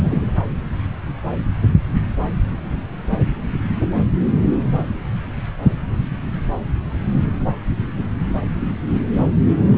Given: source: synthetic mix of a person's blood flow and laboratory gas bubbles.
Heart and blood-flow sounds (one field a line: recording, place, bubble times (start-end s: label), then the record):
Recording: Doppler ultrasound of blood flow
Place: subclavian vein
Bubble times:
0.01-0.21 s: bubbles
From the record:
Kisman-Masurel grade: 212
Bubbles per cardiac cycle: several, 3 to 8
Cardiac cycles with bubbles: 1 to 10%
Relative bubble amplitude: moderate (0.250 to 0.450)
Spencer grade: 1 (occasional bubble signal discernible with the cardiac motion signal, with majority of cardiac periods free of bubbles)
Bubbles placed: anywhere in the cardiac cycle